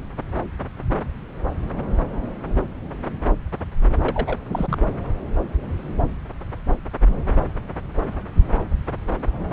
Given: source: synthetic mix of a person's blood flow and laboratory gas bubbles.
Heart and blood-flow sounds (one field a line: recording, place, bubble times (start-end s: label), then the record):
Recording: Doppler ultrasound of blood flow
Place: subclavian vein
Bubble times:
4.03-4.38 s: bubbles
4.50-4.78 s: bubbles
From the record:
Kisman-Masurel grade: 212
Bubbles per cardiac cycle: several, 3 to 8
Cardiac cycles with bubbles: 1 to 10%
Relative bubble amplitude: moderate (0.250 to 0.450)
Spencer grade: 1 (occasional bubble signal discernible with the cardiac motion signal, with majority of cardiac periods free of bubbles)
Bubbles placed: anywhere in the cardiac cycle